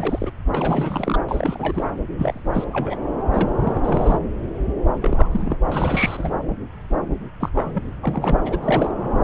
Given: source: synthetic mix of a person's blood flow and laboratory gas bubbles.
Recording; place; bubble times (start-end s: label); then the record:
Doppler ultrasound of blood flow; subclavian vein
0.00-0.32 s: bubbles
0.52-1.19 s: bubbles
1.29-1.90 s: bubbles
2.18-2.65 s: bubbles
2.73-2.98 s: bubbles
3.30-3.50 s: bubbles
3.56-4.18 s: bubbles
5.01-5.28 s: bubbles
5.31-5.57 s: bubbles
5.68-6.33 s: bubbles
7.39-7.50 s: bubbles
7.54-7.83 s: bubbles
8.02-8.59 s: bubbles
8.62-8.95 s: bubbles
From the record:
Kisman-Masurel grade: 332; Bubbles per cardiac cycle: rolling drumbeat, 9 or more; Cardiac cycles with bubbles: 50 to 99%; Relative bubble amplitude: moderate (0.250 to 0.450); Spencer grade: 3 (all of the cardiac periods contain showers or single bubble signals, but not dominating or overriding the cardiac motion signals); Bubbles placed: anywhere in the cardiac cycle